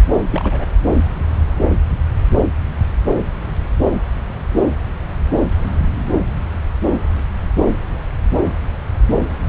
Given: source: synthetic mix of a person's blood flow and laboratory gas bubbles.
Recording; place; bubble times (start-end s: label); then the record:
Doppler ultrasound of blood flow; subclavian vein
0.31-0.65 s: bubbles
From the record:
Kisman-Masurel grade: 211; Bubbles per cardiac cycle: several, 3 to 8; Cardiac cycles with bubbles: 1 to 10%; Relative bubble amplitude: barely perceptible (0.100 to 0.250); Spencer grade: 1 (occasional bubble signal discernible with the cardiac motion signal, with majority of cardiac periods free of bubbles); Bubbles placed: anywhere in the cardiac cycle